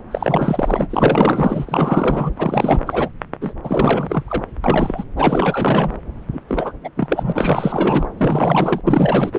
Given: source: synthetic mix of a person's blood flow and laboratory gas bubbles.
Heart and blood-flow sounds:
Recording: Doppler ultrasound of blood flow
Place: subclavian vein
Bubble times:
0.11-2.32 s: bubbles
2.38-2.81 s: bubbles
2.87-3.10 s: bubbles
3.41-3.54 s: bubbles
3.63-4.23 s: bubbles
4.27-4.43 s: bubbles
4.64-5.04 s: bubbles
5.16-5.93 s: bubbles
6.32-6.40 s: bubbles
6.48-6.72 s: bubbles
6.83-6.89 s: bubbles
6.96-8.09 s: bubbles
8.17-8.81 s: bubbles
8.87-9.39 s: bubbles
From the record:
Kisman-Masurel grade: 444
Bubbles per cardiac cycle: continuous sound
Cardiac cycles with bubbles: 100%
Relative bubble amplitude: maximal (0.775 to 0.999)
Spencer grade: 4 (maximum detectable bubble signal sounding continuously throughout systole and diastole of every cardiac period, and overriding the amplitude of the normal cardiac signals)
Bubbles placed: anywhere in the cardiac cycle

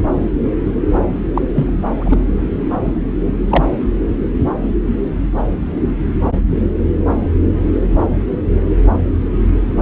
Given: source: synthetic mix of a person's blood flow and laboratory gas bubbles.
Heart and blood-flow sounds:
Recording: Doppler ultrasound of blood flow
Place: subclavian vein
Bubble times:
1.34-1.45 s: bubbles
1.54-1.71 s: bubbles
1.95-2.19 s: bubbles
2.82-3.11 s: bubbles
3.50-3.65 s: bubbles
From the record:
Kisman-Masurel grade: 123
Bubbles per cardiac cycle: 1 to 2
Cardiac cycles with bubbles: 10 to 50%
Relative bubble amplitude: loud (0.450 to 0.775)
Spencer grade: 2 (many but less than half of the cardiac periods contain bubble signals, singularly or in groups)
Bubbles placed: anywhere in the cardiac cycle

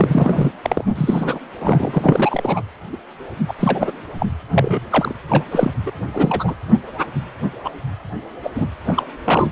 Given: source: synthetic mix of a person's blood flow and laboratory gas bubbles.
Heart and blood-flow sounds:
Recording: Doppler ultrasound of blood flow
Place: precordium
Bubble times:
0.00-0.52 s: bubbles
0.63-0.84 s: bubbles
0.95-1.40 s: bubbles
1.59-2.62 s: bubbles
2.92-2.97 s: bubbles
3.48-3.54 s: bubbles
3.60-3.91 s: bubbles
4.19-4.27 s: bubbles
4.53-4.85 s: bubbles
4.89-5.15 s: bubbles
5.29-5.45 s: bubbles
5.51-5.71 s: bubbles
5.86-5.92 s: bubbles
6.15-6.54 s: bubbles
6.67-6.78 s: bubbles
7.65-7.69 s: bubbles
8.43-8.50 s: bubbles
8.55-8.66 s: bubbles
8.87-9.03 s: bubbles
9.25-9.52 s: bubbles
From the record:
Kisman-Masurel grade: 243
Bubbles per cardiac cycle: several, 3 to 8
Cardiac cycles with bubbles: 100%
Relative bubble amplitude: loud (0.450 to 0.775)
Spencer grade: 3 (all of the cardiac periods contain showers or single bubble signals, but not dominating or overriding the cardiac motion signals)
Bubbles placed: anywhere in the cardiac cycle

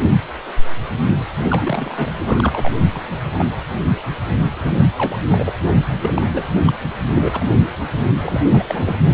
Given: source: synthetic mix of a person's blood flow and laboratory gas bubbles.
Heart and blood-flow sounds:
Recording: Doppler ultrasound of blood flow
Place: precordium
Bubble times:
1.49-2.71 s: bubbles
2.93-3.18 s: bubbles
3.36-3.51 s: bubbles
4.57-4.86 s: bubbles
4.97-5.17 s: bubbles
5.28-5.51 s: bubbles
6.00-6.12 s: bubbles
6.16-6.22 s: bubbles
6.33-6.44 s: bubbles
6.67-6.72 s: bubbles
7.12-7.46 s: bubbles
8.24-8.42 s: bubbles
8.49-8.63 s: bubbles
8.68-8.94 s: bubbles
From the record:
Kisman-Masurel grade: 232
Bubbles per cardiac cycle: several, 3 to 8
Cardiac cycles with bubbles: 50 to 99%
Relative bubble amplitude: moderate (0.250 to 0.450)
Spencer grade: 3 (all of the cardiac periods contain showers or single bubble signals, but not dominating or overriding the cardiac motion signals)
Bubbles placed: anywhere in the cardiac cycle

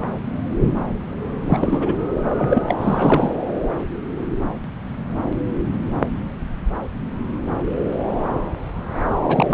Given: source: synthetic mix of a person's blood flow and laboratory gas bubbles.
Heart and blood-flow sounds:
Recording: Doppler ultrasound of blood flow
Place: subclavian vein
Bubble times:
1.45-1.93 s: bubbles
2.37-2.62 s: bubbles
2.67-2.75 s: bubbles
2.81-3.30 s: bubbles
9.29-9.54 s: bubbles
From the record:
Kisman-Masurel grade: 222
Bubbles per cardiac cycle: several, 3 to 8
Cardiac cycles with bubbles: 10 to 50%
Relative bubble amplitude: moderate (0.250 to 0.450)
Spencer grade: 2 (many but less than half of the cardiac periods contain bubble signals, singularly or in groups)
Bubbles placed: anywhere in the cardiac cycle

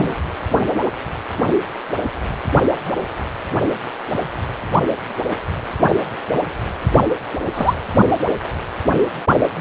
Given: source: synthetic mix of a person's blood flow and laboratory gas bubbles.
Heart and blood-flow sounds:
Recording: Doppler ultrasound of blood flow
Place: precordium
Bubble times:
0.00-0.15 s: bubbles
7.54-7.75 s: bubbles
From the record:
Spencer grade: 2 (many but less than half of the cardiac periods contain bubble signals, singularly or in groups)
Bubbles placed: only in the low amplitude regions of the cardiac cycle

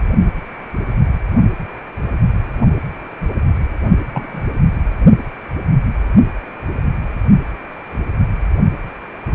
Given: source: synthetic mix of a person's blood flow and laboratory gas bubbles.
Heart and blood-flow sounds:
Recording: Doppler ultrasound of blood flow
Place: precordium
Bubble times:
4.13-4.43 s: bubbles
From the record:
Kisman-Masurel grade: 123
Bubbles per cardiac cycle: 1 to 2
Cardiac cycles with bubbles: 10 to 50%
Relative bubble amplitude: loud (0.450 to 0.775)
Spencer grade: 2 (many but less than half of the cardiac periods contain bubble signals, singularly or in groups)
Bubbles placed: only in the low amplitude regions of the cardiac cycle

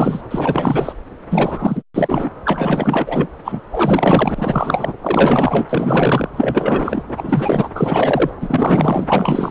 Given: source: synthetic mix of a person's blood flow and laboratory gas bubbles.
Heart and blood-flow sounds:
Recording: Doppler ultrasound of blood flow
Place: subclavian vein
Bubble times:
0.00-0.21 s: bubbles
0.30-0.93 s: bubbles
1.30-1.82 s: bubbles
1.94-2.30 s: bubbles
2.45-3.28 s: bubbles
3.44-3.62 s: bubbles
3.65-3.67 s: bubbles
3.71-4.94 s: bubbles
5.02-5.67 s: bubbles
5.69-6.30 s: bubbles
6.36-7.04 s: bubbles
7.08-7.69 s: bubbles
7.75-8.30 s: bubbles
8.40-9.51 s: bubbles
From the record:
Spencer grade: 4 (maximum detectable bubble signal sounding continuously throughout systole and diastole of every cardiac period, and overriding the amplitude of the normal cardiac signals)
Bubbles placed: anywhere in the cardiac cycle

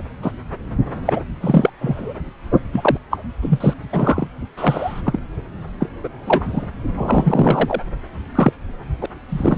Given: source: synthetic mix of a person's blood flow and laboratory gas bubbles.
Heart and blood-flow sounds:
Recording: Doppler ultrasound of blood flow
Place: subclavian vein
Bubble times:
0.00-0.03 s: bubbles
0.22-0.32 s: bubbles
1.05-1.23 s: bubbles
1.40-1.70 s: bubbles
1.80-2.14 s: bubbles
2.72-2.97 s: bubbles
3.11-3.18 s: bubbles
3.42-3.74 s: bubbles
3.92-4.27 s: bubbles
4.56-5.01 s: bubbles
5.04-5.20 s: bubbles
5.80-5.87 s: bubbles
6.04-6.08 s: bubbles
6.26-6.67 s: bubbles
6.97-7.80 s: bubbles
8.35-8.52 s: bubbles
9.01-9.06 s: bubbles
9.29-9.58 s: bubbles
From the record:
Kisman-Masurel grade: 243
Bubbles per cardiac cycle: several, 3 to 8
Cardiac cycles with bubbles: 100%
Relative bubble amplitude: loud (0.450 to 0.775)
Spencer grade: 3 (all of the cardiac periods contain showers or single bubble signals, but not dominating or overriding the cardiac motion signals)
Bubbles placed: anywhere in the cardiac cycle

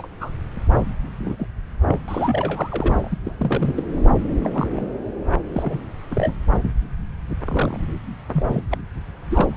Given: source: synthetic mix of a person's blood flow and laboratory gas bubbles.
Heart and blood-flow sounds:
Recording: Doppler ultrasound of blood flow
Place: subclavian vein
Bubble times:
0.00-0.08 s: bubbles
0.20-0.32 s: bubbles
1.20-1.36 s: bubbles
1.39-1.47 s: bubbles
1.88-1.98 s: bubbles
2.08-3.17 s: bubbles
3.25-3.34 s: bubbles
3.38-3.83 s: bubbles
4.43-4.50 s: bubbles
4.54-4.67 s: bubbles
4.71-4.88 s: bubbles
5.15-5.37 s: bubbles
5.53-5.79 s: bubbles
6.11-6.34 s: bubbles
7.45-7.77 s: bubbles
8.33-8.61 s: bubbles
8.71-8.78 s: bubbles
9.30-9.56 s: bubbles
From the record:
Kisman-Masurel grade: 242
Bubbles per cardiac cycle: several, 3 to 8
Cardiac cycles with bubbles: 100%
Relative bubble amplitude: moderate (0.250 to 0.450)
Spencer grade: 3 (all of the cardiac periods contain showers or single bubble signals, but not dominating or overriding the cardiac motion signals)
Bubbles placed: anywhere in the cardiac cycle

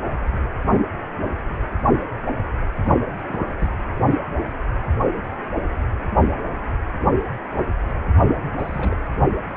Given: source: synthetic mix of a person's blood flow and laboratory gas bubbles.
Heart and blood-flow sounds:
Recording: Doppler ultrasound of blood flow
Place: precordium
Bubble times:
0.32-0.41 s: bubbles
2.86-2.98 s: bubbles
3.25-3.78 s: bubbles
8.58-8.97 s: bubbles
From the record:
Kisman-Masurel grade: 221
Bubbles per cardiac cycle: several, 3 to 8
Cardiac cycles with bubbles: 10 to 50%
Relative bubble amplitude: barely perceptible (0.100 to 0.250)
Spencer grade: 2 (many but less than half of the cardiac periods contain bubble signals, singularly or in groups)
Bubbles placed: anywhere in the cardiac cycle

